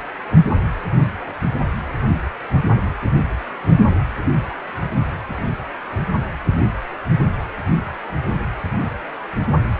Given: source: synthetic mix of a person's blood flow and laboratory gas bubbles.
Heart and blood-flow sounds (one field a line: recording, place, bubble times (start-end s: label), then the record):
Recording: Doppler ultrasound of blood flow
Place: precordium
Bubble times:
no bubbles
From the record:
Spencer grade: 0 (complete lack of bubble signals)